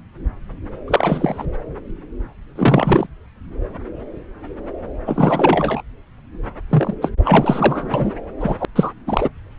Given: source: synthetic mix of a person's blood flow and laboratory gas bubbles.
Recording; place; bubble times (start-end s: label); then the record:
Doppler ultrasound of blood flow; subclavian vein
0.88-1.45 s: bubbles
2.55-3.07 s: bubbles
5.07-5.82 s: bubbles
6.70-6.94 s: bubbles
7.02-7.11 s: bubbles
7.18-7.90 s: bubbles
7.94-8.12 s: bubbles
8.40-8.65 s: bubbles
8.76-8.92 s: bubbles
9.06-9.29 s: bubbles
From the record:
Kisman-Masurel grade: 233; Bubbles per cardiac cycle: several, 3 to 8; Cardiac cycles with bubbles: 50 to 99%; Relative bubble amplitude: loud (0.450 to 0.775); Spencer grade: 3 (all of the cardiac periods contain showers or single bubble signals, but not dominating or overriding the cardiac motion signals); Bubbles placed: anywhere in the cardiac cycle